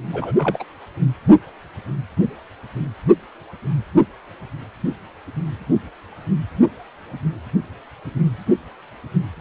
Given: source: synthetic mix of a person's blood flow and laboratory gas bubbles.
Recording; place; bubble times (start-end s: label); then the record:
Doppler ultrasound of blood flow; precordium
0.13-0.33 s: bubbles
0.38-0.65 s: bubbles
From the record:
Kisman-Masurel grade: 212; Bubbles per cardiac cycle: several, 3 to 8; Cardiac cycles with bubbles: 1 to 10%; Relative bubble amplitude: moderate (0.250 to 0.450); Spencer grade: 1 (occasional bubble signal discernible with the cardiac motion signal, with majority of cardiac periods free of bubbles); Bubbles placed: anywhere in the cardiac cycle